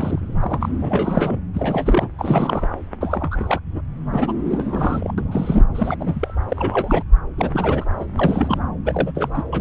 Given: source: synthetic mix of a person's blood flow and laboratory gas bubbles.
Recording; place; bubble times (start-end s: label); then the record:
Doppler ultrasound of blood flow; subclavian vein
0.00-0.69 s: bubbles
0.81-1.41 s: bubbles
1.54-2.08 s: bubbles
2.18-2.69 s: bubbles
3.00-3.59 s: bubbles
3.66-3.81 s: bubbles
4.12-4.32 s: bubbles
4.45-5.13 s: bubbles
5.18-5.66 s: bubbles
5.75-5.96 s: bubbles
5.99-6.33 s: bubbles
6.49-7.03 s: bubbles
7.38-7.85 s: bubbles
8.00-8.05 s: bubbles
8.16-8.62 s: bubbles
8.85-9.12 s: bubbles
9.14-9.44 s: bubbles
9.53-9.61 s: bubbles
From the record:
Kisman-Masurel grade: 342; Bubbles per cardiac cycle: rolling drumbeat, 9 or more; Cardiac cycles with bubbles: 100%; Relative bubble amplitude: moderate (0.250 to 0.450); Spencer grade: 3 (all of the cardiac periods contain showers or single bubble signals, but not dominating or overriding the cardiac motion signals); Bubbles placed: anywhere in the cardiac cycle